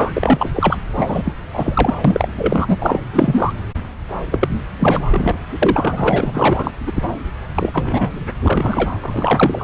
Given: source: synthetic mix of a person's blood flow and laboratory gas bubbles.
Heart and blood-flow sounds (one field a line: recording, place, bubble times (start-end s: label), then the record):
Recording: Doppler ultrasound of blood flow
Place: subclavian vein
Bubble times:
0.00-0.48 s: bubbles
0.54-0.77 s: bubbles
0.96-1.33 s: bubbles
1.53-1.94 s: bubbles
2.04-2.98 s: bubbles
3.13-3.53 s: bubbles
4.32-4.49 s: bubbles
4.79-5.01 s: bubbles
5.11-5.40 s: bubbles
5.62-6.71 s: bubbles
6.86-6.92 s: bubbles
6.96-7.03 s: bubbles
7.54-8.10 s: bubbles
8.43-8.90 s: bubbles
9.02-9.64 s: bubbles
From the record:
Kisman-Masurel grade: 343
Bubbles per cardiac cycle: rolling drumbeat, 9 or more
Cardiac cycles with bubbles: 100%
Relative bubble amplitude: loud (0.450 to 0.775)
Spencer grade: 3 (all of the cardiac periods contain showers or single bubble signals, but not dominating or overriding the cardiac motion signals)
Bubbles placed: anywhere in the cardiac cycle